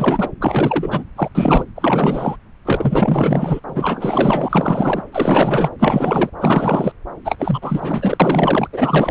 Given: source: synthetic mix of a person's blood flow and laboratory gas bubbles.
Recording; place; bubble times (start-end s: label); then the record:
Doppler ultrasound of blood flow; subclavian vein
0.00-0.31 s: bubbles
0.41-1.03 s: bubbles
1.17-1.28 s: bubbles
1.34-1.65 s: bubbles
1.75-2.37 s: bubbles
2.65-3.60 s: bubbles
3.66-5.03 s: bubbles
5.12-5.69 s: bubbles
5.79-6.29 s: bubbles
6.40-6.92 s: bubbles
7.24-8.67 s: bubbles
8.72-9.11 s: bubbles
From the record:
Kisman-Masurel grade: 444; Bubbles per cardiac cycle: continuous sound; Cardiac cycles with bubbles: 100%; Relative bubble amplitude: maximal (0.775 to 0.999); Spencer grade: 4 (maximum detectable bubble signal sounding continuously throughout systole and diastole of every cardiac period, and overriding the amplitude of the normal cardiac signals); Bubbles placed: anywhere in the cardiac cycle